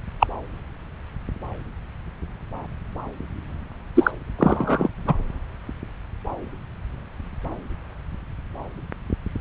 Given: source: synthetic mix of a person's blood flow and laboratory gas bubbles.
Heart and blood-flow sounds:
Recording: Doppler ultrasound of blood flow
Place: subclavian vein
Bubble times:
0.19-0.27 s: bubbles
3.95-4.11 s: bubbles
4.38-4.89 s: bubbles
5.07-5.14 s: bubbles
From the record:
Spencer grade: 2 (many but less than half of the cardiac periods contain bubble signals, singularly or in groups)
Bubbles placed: anywhere in the cardiac cycle

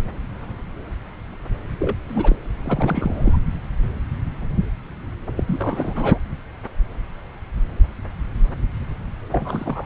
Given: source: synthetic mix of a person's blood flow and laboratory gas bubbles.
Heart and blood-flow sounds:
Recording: Doppler ultrasound of blood flow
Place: subclavian vein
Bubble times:
0.00-0.04 s: bubbles
1.79-1.96 s: bubbles
2.08-2.36 s: bubbles
2.65-3.39 s: bubbles
5.35-5.43 s: bubbles
5.46-6.18 s: bubbles
9.32-9.86 s: bubbles
From the record:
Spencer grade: 2 (many but less than half of the cardiac periods contain bubble signals, singularly or in groups)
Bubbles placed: anywhere in the cardiac cycle

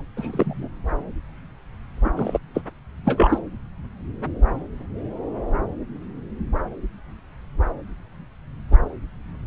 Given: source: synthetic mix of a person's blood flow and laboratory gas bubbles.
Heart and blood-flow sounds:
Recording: Doppler ultrasound of blood flow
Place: subclavian vein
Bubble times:
0.16-0.69 s: bubbles
2.04-2.38 s: bubbles
2.54-2.62 s: bubbles
3.04-3.38 s: bubbles
From the record:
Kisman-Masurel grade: 222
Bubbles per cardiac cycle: several, 3 to 8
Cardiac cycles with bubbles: 10 to 50%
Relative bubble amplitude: moderate (0.250 to 0.450)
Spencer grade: 2 (many but less than half of the cardiac periods contain bubble signals, singularly or in groups)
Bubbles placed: anywhere in the cardiac cycle

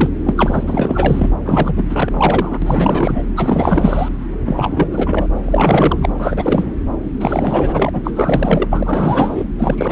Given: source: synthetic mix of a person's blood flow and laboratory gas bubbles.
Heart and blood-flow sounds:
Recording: Doppler ultrasound of blood flow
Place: subclavian vein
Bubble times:
0.00-0.09 s: bubbles
0.26-0.34 s: bubbles
0.36-0.64 s: bubbles
0.67-1.28 s: bubbles
1.45-2.58 s: bubbles
2.61-3.29 s: bubbles
3.36-4.08 s: bubbles
4.46-5.26 s: bubbles
5.43-6.09 s: bubbles
6.20-6.72 s: bubbles
7.20-7.89 s: bubbles
7.93-8.68 s: bubbles
8.70-9.44 s: bubbles
9.58-9.91 s: bubbles
From the record:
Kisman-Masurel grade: 444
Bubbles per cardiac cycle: continuous sound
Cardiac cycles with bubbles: 100%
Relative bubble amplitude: maximal (0.775 to 0.999)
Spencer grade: 4 (maximum detectable bubble signal sounding continuously throughout systole and diastole of every cardiac period, and overriding the amplitude of the normal cardiac signals)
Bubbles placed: anywhere in the cardiac cycle

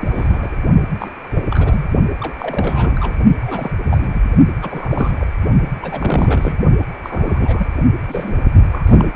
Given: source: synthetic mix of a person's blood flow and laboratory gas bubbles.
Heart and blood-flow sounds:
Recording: Doppler ultrasound of blood flow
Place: precordium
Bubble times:
0.00-0.58 s: bubbles
0.99-1.10 s: bubbles
1.33-1.44 s: bubbles
1.50-1.88 s: bubbles
2.21-2.34 s: bubbles
2.39-3.15 s: bubbles
3.42-3.73 s: bubbles
3.89-4.21 s: bubbles
4.62-5.27 s: bubbles
5.81-6.54 s: bubbles
7.04-7.67 s: bubbles
8.09-8.34 s: bubbles
8.71-9.04 s: bubbles
From the record:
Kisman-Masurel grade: 332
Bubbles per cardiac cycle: rolling drumbeat, 9 or more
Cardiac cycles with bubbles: 50 to 99%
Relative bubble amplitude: moderate (0.250 to 0.450)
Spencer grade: 3 (all of the cardiac periods contain showers or single bubble signals, but not dominating or overriding the cardiac motion signals)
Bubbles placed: only in the low amplitude regions of the cardiac cycle

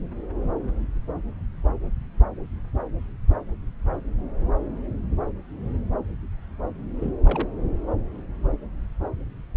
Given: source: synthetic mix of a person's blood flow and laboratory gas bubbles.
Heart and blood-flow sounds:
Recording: Doppler ultrasound of blood flow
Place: subclavian vein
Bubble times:
7.00-7.13 s: bubbles
7.24-7.48 s: bubbles
From the record:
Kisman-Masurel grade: 221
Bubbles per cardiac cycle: several, 3 to 8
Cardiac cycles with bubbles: 10 to 50%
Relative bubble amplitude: barely perceptible (0.100 to 0.250)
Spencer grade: 2 (many but less than half of the cardiac periods contain bubble signals, singularly or in groups)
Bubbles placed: anywhere in the cardiac cycle

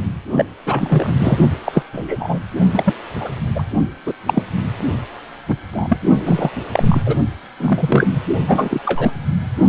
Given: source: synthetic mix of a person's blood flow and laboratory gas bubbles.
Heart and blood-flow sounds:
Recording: Doppler ultrasound of blood flow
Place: precordium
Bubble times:
0.32-0.45 s: bubbles
0.66-1.13 s: bubbles
1.19-1.38 s: bubbles
1.65-1.83 s: bubbles
1.92-2.40 s: bubbles
2.73-2.94 s: bubbles
3.20-3.30 s: bubbles
3.54-3.63 s: bubbles
4.05-4.13 s: bubbles
4.27-4.42 s: bubbles
5.48-5.56 s: bubbles
5.72-5.99 s: bubbles
6.25-6.51 s: bubbles
6.72-7.02 s: bubbles
7.06-7.17 s: bubbles
7.60-8.07 s: bubbles
8.13-8.24 s: bubbles
8.47-8.80 s: bubbles
8.85-9.11 s: bubbles
From the record:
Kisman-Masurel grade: 243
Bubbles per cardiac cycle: several, 3 to 8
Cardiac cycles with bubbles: 100%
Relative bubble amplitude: loud (0.450 to 0.775)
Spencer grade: 3 (all of the cardiac periods contain showers or single bubble signals, but not dominating or overriding the cardiac motion signals)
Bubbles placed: only in the low amplitude regions of the cardiac cycle

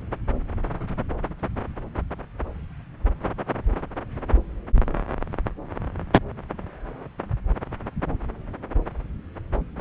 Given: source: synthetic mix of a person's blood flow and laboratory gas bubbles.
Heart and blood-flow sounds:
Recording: Doppler ultrasound of blood flow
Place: subclavian vein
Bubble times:
no bubbles
From the record:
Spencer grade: 0 (complete lack of bubble signals)

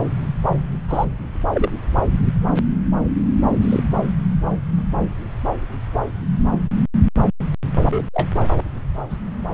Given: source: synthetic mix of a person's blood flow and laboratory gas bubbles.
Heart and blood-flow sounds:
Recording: Doppler ultrasound of blood flow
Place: subclavian vein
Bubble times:
0.88-1.05 s: bubbles
1.53-1.69 s: bubbles
3.61-3.83 s: bubbles
6.53-6.58 s: bubbles
7.81-8.03 s: bubbles
8.13-8.29 s: bubbles
9.09-9.17 s: bubbles
From the record:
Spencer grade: 2 (many but less than half of the cardiac periods contain bubble signals, singularly or in groups)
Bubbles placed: anywhere in the cardiac cycle

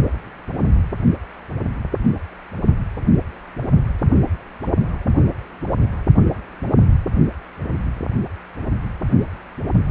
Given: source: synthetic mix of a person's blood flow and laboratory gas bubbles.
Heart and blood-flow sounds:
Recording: Doppler ultrasound of blood flow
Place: precordium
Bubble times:
no bubbles
From the record:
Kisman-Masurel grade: 000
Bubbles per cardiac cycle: 0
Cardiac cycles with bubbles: 0%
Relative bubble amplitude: no bubbles discernible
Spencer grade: 0 (complete lack of bubble signals)

